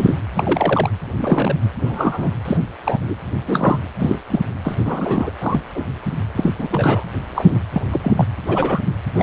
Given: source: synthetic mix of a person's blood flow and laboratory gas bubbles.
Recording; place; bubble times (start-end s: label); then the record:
Doppler ultrasound of blood flow; precordium
0.00-0.20 s: bubbles
0.35-0.90 s: bubbles
1.19-1.54 s: bubbles
1.81-2.29 s: bubbles
2.45-2.57 s: bubbles
2.83-3.15 s: bubbles
3.46-3.80 s: bubbles
3.99-4.20 s: bubbles
4.30-4.40 s: bubbles
4.63-4.75 s: bubbles
4.79-5.30 s: bubbles
5.41-5.59 s: bubbles
5.75-5.83 s: bubbles
6.35-6.52 s: bubbles
6.58-7.04 s: bubbles
7.35-7.58 s: bubbles
7.72-7.82 s: bubbles
7.92-8.14 s: bubbles
8.17-8.25 s: bubbles
8.46-8.81 s: bubbles
9.15-9.23 s: bubbles
From the record:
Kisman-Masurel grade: 243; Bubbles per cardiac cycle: several, 3 to 8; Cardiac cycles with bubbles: 100%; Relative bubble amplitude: loud (0.450 to 0.775); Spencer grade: 3 (all of the cardiac periods contain showers or single bubble signals, but not dominating or overriding the cardiac motion signals); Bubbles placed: anywhere in the cardiac cycle